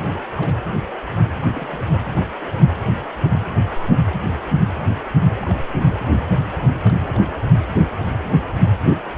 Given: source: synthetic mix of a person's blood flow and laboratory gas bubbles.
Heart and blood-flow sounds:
Doppler ultrasound of blood flow; precordium
0.01-0.21 s: bubbles
0.37-0.55 s: bubbles
1.41-1.46 s: bubbles
1.54-1.92 s: bubbles
5.42-5.54 s: bubbles
5.73-6.00 s: bubbles
6.81-6.95 s: bubbles
6.99-7.21 s: bubbles
From the record:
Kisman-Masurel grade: 221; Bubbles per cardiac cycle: several, 3 to 8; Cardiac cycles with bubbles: 10 to 50%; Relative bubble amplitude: barely perceptible (0.100 to 0.250); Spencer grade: 2 (many but less than half of the cardiac periods contain bubble signals, singularly or in groups); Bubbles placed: anywhere in the cardiac cycle

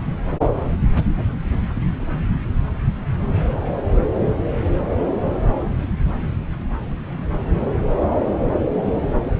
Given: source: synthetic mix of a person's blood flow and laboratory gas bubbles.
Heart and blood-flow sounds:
Doppler ultrasound of blood flow; subclavian vein
1.75-2.25 s: bubbles
From the record:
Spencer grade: 1 (occasional bubble signal discernible with the cardiac motion signal, with majority of cardiac periods free of bubbles); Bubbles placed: anywhere in the cardiac cycle

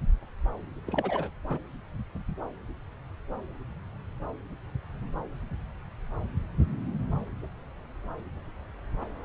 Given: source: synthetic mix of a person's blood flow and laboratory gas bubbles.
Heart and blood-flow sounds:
Doppler ultrasound of blood flow; subclavian vein
0.86-1.30 s: bubbles
1.48-1.59 s: bubbles
From the record:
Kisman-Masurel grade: 221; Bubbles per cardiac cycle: several, 3 to 8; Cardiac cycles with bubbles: 10 to 50%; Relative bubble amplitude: barely perceptible (0.100 to 0.250); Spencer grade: 2 (many but less than half of the cardiac periods contain bubble signals, singularly or in groups); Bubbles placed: anywhere in the cardiac cycle

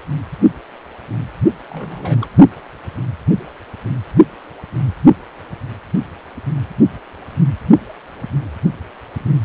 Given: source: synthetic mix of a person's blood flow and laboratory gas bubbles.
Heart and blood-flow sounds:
Doppler ultrasound of blood flow; precordium
1.68-2.27 s: bubbles
From the record:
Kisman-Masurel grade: 211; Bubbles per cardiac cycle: several, 3 to 8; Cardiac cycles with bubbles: 1 to 10%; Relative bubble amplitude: barely perceptible (0.100 to 0.250); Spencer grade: 1 (occasional bubble signal discernible with the cardiac motion signal, with majority of cardiac periods free of bubbles); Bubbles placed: only in the low amplitude regions of the cardiac cycle

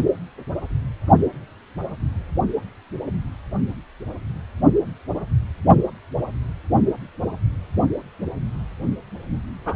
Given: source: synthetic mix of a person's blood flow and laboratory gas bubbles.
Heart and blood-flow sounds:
Doppler ultrasound of blood flow; precordium
9.65-9.76 s: bubbles
From the record:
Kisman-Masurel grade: 212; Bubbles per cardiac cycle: several, 3 to 8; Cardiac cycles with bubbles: 1 to 10%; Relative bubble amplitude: moderate (0.250 to 0.450); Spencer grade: 1 (occasional bubble signal discernible with the cardiac motion signal, with majority of cardiac periods free of bubbles); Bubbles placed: only in the low amplitude regions of the cardiac cycle

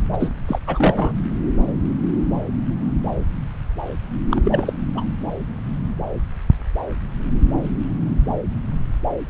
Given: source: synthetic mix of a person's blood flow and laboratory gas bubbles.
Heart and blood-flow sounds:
Doppler ultrasound of blood flow; subclavian vein
0.12-0.30 s: bubbles
0.48-0.59 s: bubbles
0.66-1.14 s: bubbles
4.29-4.73 s: bubbles
4.95-5.05 s: bubbles
From the record:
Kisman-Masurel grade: 222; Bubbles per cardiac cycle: several, 3 to 8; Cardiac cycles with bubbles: 10 to 50%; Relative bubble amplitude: moderate (0.250 to 0.450); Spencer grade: 2 (many but less than half of the cardiac periods contain bubble signals, singularly or in groups); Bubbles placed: anywhere in the cardiac cycle

